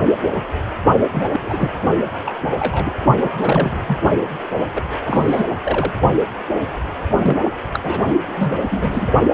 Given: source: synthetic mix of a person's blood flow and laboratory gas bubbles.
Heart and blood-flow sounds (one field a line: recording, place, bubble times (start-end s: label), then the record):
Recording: Doppler ultrasound of blood flow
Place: precordium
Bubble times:
1.12-1.29 s: bubbles
1.32-1.73 s: bubbles
2.25-2.35 s: bubbles
2.54-2.92 s: bubbles
3.21-3.78 s: bubbles
3.87-3.98 s: bubbles
4.75-4.82 s: bubbles
5.06-5.43 s: bubbles
5.63-5.93 s: bubbles
7.21-7.37 s: bubbles
7.74-7.79 s: bubbles
7.83-7.99 s: bubbles
8.25-9.12 s: bubbles
From the record:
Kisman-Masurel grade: 232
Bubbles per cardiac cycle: several, 3 to 8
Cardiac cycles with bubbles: 50 to 99%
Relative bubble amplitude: moderate (0.250 to 0.450)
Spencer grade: 3 (all of the cardiac periods contain showers or single bubble signals, but not dominating or overriding the cardiac motion signals)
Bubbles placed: only in the low amplitude regions of the cardiac cycle